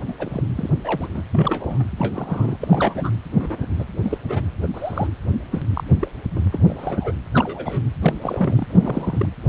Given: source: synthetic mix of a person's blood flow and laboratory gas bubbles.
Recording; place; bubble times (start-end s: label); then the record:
Doppler ultrasound of blood flow; precordium
0.07-0.14 s: bubbles
0.18-0.43 s: bubbles
0.55-0.69 s: bubbles
0.85-1.08 s: bubbles
1.14-1.21 s: bubbles
1.31-1.83 s: bubbles
1.97-2.57 s: bubbles
2.60-3.11 s: bubbles
3.31-3.67 s: bubbles
3.78-3.85 s: bubbles
4.02-4.22 s: bubbles
4.24-4.45 s: bubbles
4.62-4.67 s: bubbles
4.74-5.07 s: bubbles
5.51-5.61 s: bubbles
5.75-5.83 s: bubbles
5.99-6.08 s: bubbles
6.35-6.40 s: bubbles
6.52-6.65 s: bubbles
6.68-7.12 s: bubbles
7.32-7.81 s: bubbles
8.00-8.14 s: bubbles
8.21-8.65 s: bubbles
8.70-9.29 s: bubbles
From the record:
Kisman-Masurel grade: 242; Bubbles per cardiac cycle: several, 3 to 8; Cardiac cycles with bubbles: 100%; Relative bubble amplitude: moderate (0.250 to 0.450); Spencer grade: 3 (all of the cardiac periods contain showers or single bubble signals, but not dominating or overriding the cardiac motion signals); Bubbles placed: anywhere in the cardiac cycle